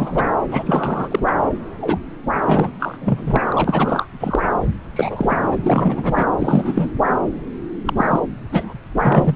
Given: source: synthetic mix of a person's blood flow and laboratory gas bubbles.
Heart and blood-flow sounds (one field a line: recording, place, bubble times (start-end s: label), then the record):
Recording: Doppler ultrasound of blood flow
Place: subclavian vein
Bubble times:
0.00-0.31 s: bubbles
0.52-1.22 s: bubbles
1.26-1.32 s: bubbles
1.80-1.99 s: bubbles
2.45-2.70 s: bubbles
2.79-2.97 s: bubbles
3.01-3.41 s: bubbles
3.48-4.08 s: bubbles
4.20-4.39 s: bubbles
4.96-5.37 s: bubbles
5.51-5.58 s: bubbles
5.64-6.25 s: bubbles
6.39-6.90 s: bubbles
7.85-8.19 s: bubbles
8.52-8.73 s: bubbles
8.97-9.35 s: bubbles
From the record:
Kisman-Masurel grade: 233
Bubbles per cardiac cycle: several, 3 to 8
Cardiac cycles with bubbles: 50 to 99%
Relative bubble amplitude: loud (0.450 to 0.775)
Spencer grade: 3 (all of the cardiac periods contain showers or single bubble signals, but not dominating or overriding the cardiac motion signals)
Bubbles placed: anywhere in the cardiac cycle